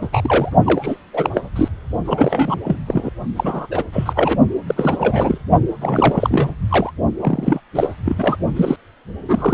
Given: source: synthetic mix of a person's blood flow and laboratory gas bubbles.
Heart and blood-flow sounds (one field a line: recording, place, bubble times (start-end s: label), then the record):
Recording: Doppler ultrasound of blood flow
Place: precordium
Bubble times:
0.01-0.08 s: bubbles
0.12-0.52 s: bubbles
0.65-0.97 s: bubbles
1.13-1.29 s: bubbles
1.34-1.41 s: bubbles
1.55-1.68 s: bubbles
2.05-2.55 s: bubbles
2.64-2.76 s: bubbles
2.87-3.11 s: bubbles
3.36-3.68 s: bubbles
3.71-3.83 s: bubbles
3.92-4.37 s: bubbles
4.67-5.38 s: bubbles
5.81-6.49 s: bubbles
6.69-6.91 s: bubbles
7.20-7.61 s: bubbles
7.75-7.96 s: bubbles
8.04-8.37 s: bubbles
8.55-8.76 s: bubbles
9.28-9.54 s: bubbles
From the record:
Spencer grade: 3 (all of the cardiac periods contain showers or single bubble signals, but not dominating or overriding the cardiac motion signals)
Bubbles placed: only in the low amplitude regions of the cardiac cycle